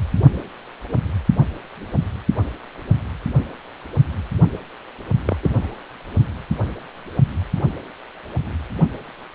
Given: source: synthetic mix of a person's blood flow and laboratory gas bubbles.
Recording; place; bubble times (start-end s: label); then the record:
Doppler ultrasound of blood flow; precordium
5.25-5.36 s: bubbles
5.42-5.74 s: bubbles
From the record:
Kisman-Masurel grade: 112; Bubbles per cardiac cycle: 1 to 2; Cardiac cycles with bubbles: 1 to 10%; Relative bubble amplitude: moderate (0.250 to 0.450); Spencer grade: 1 (occasional bubble signal discernible with the cardiac motion signal, with majority of cardiac periods free of bubbles); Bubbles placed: only in the low amplitude regions of the cardiac cycle